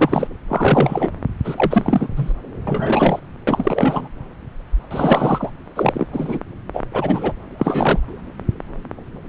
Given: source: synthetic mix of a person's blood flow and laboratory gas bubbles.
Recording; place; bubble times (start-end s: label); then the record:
Doppler ultrasound of blood flow; subclavian vein
0.00-0.28 s: bubbles
0.48-1.10 s: bubbles
1.44-2.08 s: bubbles
2.16-2.33 s: bubbles
2.67-3.19 s: bubbles
3.47-4.08 s: bubbles
4.91-5.50 s: bubbles
5.75-6.07 s: bubbles
6.12-6.40 s: bubbles
6.74-6.83 s: bubbles
6.92-7.33 s: bubbles
7.58-8.01 s: bubbles
From the record:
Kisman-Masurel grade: 333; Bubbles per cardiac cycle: rolling drumbeat, 9 or more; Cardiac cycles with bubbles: 50 to 99%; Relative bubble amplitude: loud (0.450 to 0.775); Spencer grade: 3 (all of the cardiac periods contain showers or single bubble signals, but not dominating or overriding the cardiac motion signals); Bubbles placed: anywhere in the cardiac cycle